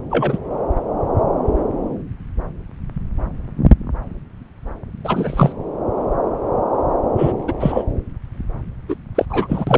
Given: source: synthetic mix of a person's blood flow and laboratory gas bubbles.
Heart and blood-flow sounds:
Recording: Doppler ultrasound of blood flow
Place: subclavian vein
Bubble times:
0.10-0.38 s: bubbles
5.04-5.52 s: bubbles
7.17-7.32 s: bubbles
7.47-7.53 s: bubbles
7.59-7.85 s: bubbles
8.88-8.95 s: bubbles
9.14-9.25 s: bubbles
9.29-9.78 s: bubbles
From the record:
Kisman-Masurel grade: 223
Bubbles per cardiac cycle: several, 3 to 8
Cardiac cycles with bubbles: 10 to 50%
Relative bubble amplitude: loud (0.450 to 0.775)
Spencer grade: 2 (many but less than half of the cardiac periods contain bubble signals, singularly or in groups)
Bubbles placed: anywhere in the cardiac cycle

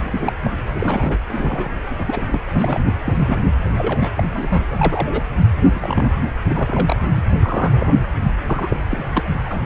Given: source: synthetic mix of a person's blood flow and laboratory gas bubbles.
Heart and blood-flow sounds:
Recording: Doppler ultrasound of blood flow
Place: precordium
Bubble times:
0.02-0.32 s: bubbles
0.43-0.51 s: bubbles
0.74-1.18 s: bubbles
1.27-1.82 s: bubbles
1.98-2.41 s: bubbles
2.54-2.81 s: bubbles
3.04-3.50 s: bubbles
3.66-4.09 s: bubbles
4.17-4.65 s: bubbles
4.71-5.24 s: bubbles
5.62-5.69 s: bubbles
5.74-6.12 s: bubbles
6.46-7.08 s: bubbles
7.15-7.24 s: bubbles
7.35-7.95 s: bubbles
8.47-8.77 s: bubbles
8.87-9.30 s: bubbles
9.46-9.57 s: bubbles
From the record:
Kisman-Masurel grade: 242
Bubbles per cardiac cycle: several, 3 to 8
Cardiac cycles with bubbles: 100%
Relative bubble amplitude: moderate (0.250 to 0.450)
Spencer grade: 3 (all of the cardiac periods contain showers or single bubble signals, but not dominating or overriding the cardiac motion signals)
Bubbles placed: anywhere in the cardiac cycle

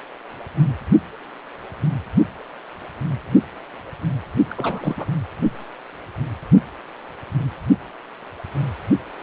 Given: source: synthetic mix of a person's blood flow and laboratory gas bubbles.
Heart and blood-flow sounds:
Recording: Doppler ultrasound of blood flow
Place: precordium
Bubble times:
4.51-5.05 s: bubbles
From the record:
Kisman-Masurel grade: 211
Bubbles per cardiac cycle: several, 3 to 8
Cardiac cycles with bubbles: 1 to 10%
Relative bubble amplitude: barely perceptible (0.100 to 0.250)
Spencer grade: 1 (occasional bubble signal discernible with the cardiac motion signal, with majority of cardiac periods free of bubbles)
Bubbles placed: only in the low amplitude regions of the cardiac cycle

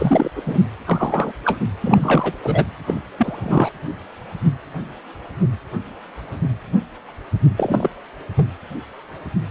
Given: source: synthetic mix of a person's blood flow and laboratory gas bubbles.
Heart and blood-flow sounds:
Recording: Doppler ultrasound of blood flow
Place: precordium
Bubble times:
0.00-0.32 s: bubbles
0.35-0.42 s: bubbles
0.46-0.59 s: bubbles
0.85-1.32 s: bubbles
1.44-1.57 s: bubbles
1.83-2.33 s: bubbles
2.43-2.65 s: bubbles
2.86-3.00 s: bubbles
3.18-3.70 s: bubbles
7.57-7.90 s: bubbles
8.36-8.47 s: bubbles
From the record:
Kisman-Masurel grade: 233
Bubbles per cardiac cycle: several, 3 to 8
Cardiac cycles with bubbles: 50 to 99%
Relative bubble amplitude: loud (0.450 to 0.775)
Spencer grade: 3 (all of the cardiac periods contain showers or single bubble signals, but not dominating or overriding the cardiac motion signals)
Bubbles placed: anywhere in the cardiac cycle

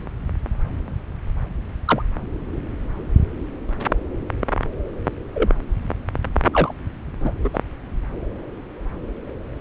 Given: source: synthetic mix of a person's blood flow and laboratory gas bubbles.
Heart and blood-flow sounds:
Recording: Doppler ultrasound of blood flow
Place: subclavian vein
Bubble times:
1.85-2.02 s: bubbles
5.34-5.50 s: bubbles
6.53-6.72 s: bubbles
7.21-7.31 s: bubbles
7.44-7.49 s: bubbles
7.54-7.58 s: bubbles
From the record:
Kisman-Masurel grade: 122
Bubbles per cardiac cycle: 1 to 2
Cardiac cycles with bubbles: 10 to 50%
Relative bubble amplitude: moderate (0.250 to 0.450)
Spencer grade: 2 (many but less than half of the cardiac periods contain bubble signals, singularly or in groups)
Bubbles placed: anywhere in the cardiac cycle

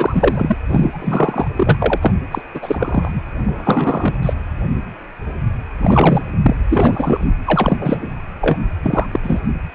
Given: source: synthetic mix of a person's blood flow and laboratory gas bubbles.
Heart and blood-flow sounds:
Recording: Doppler ultrasound of blood flow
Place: precordium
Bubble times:
0.00-0.57 s: bubbles
0.68-1.47 s: bubbles
1.56-1.98 s: bubbles
2.02-2.12 s: bubbles
2.31-2.42 s: bubbles
2.55-3.10 s: bubbles
3.13-3.23 s: bubbles
3.46-4.18 s: bubbles
4.23-4.33 s: bubbles
5.82-6.21 s: bubbles
6.42-6.56 s: bubbles
6.69-7.27 s: bubbles
7.46-8.10 s: bubbles
8.40-8.59 s: bubbles
8.83-9.06 s: bubbles
9.11-9.19 s: bubbles
9.22-9.41 s: bubbles
From the record:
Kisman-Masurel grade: 333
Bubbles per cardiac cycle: rolling drumbeat, 9 or more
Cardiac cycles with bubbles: 50 to 99%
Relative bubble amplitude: loud (0.450 to 0.775)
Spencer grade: 3 (all of the cardiac periods contain showers or single bubble signals, but not dominating or overriding the cardiac motion signals)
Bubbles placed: anywhere in the cardiac cycle

